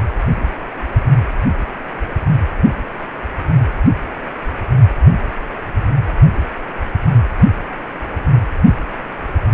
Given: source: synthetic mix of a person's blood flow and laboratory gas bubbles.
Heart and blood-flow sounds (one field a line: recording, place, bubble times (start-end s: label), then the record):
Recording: Doppler ultrasound of blood flow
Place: precordium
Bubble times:
no bubbles
From the record:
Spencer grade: 0 (complete lack of bubble signals)